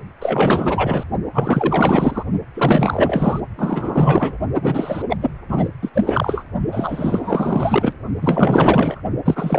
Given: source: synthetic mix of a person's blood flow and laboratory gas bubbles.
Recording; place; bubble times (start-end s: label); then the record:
Doppler ultrasound of blood flow; precordium
0.20-1.04 s: bubbles
1.33-2.23 s: bubbles
2.54-3.40 s: bubbles
3.57-4.38 s: bubbles
4.62-5.02 s: bubbles
5.09-5.17 s: bubbles
5.21-5.31 s: bubbles
5.49-5.70 s: bubbles
5.82-5.91 s: bubbles
5.94-6.44 s: bubbles
6.72-7.92 s: bubbles
8.21-9.00 s: bubbles
9.25-9.59 s: bubbles
From the record:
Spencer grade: 4 (maximum detectable bubble signal sounding continuously throughout systole and diastole of every cardiac period, and overriding the amplitude of the normal cardiac signals); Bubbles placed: only in the low amplitude regions of the cardiac cycle